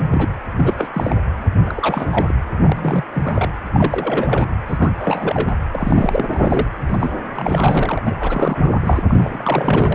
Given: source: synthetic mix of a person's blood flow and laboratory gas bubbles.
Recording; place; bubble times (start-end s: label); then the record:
Doppler ultrasound of blood flow; precordium
0.12-0.29 s: bubbles
0.57-0.88 s: bubbles
0.94-1.21 s: bubbles
1.62-2.35 s: bubbles
2.58-3.04 s: bubbles
3.13-3.50 s: bubbles
3.73-4.46 s: bubbles
4.67-4.89 s: bubbles
4.99-5.55 s: bubbles
5.72-6.68 s: bubbles
6.88-7.12 s: bubbles
7.34-8.03 s: bubbles
8.06-8.81 s: bubbles
8.86-9.03 s: bubbles
9.08-9.95 s: bubbles
From the record:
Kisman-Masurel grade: 332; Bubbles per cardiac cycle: rolling drumbeat, 9 or more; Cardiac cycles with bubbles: 50 to 99%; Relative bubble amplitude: moderate (0.250 to 0.450); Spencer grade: 3 (all of the cardiac periods contain showers or single bubble signals, but not dominating or overriding the cardiac motion signals); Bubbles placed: anywhere in the cardiac cycle